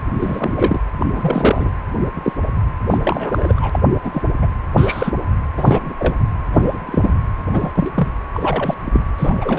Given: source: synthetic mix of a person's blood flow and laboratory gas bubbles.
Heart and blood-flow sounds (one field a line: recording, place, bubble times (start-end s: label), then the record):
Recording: Doppler ultrasound of blood flow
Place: precordium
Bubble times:
0.13-0.79 s: bubbles
0.99-1.06 s: bubbles
1.12-1.71 s: bubbles
2.13-2.33 s: bubbles
2.90-2.98 s: bubbles
3.02-3.79 s: bubbles
4.03-4.29 s: bubbles
4.42-4.47 s: bubbles
4.77-5.12 s: bubbles
5.57-5.94 s: bubbles
5.99-6.15 s: bubbles
6.53-7.14 s: bubbles
7.53-7.71 s: bubbles
7.76-7.91 s: bubbles
7.95-8.08 s: bubbles
8.34-8.75 s: bubbles
8.86-9.00 s: bubbles
9.18-9.59 s: bubbles
From the record:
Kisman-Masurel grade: 242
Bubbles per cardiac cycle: several, 3 to 8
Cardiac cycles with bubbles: 100%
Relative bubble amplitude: moderate (0.250 to 0.450)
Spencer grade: 3 (all of the cardiac periods contain showers or single bubble signals, but not dominating or overriding the cardiac motion signals)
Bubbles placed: anywhere in the cardiac cycle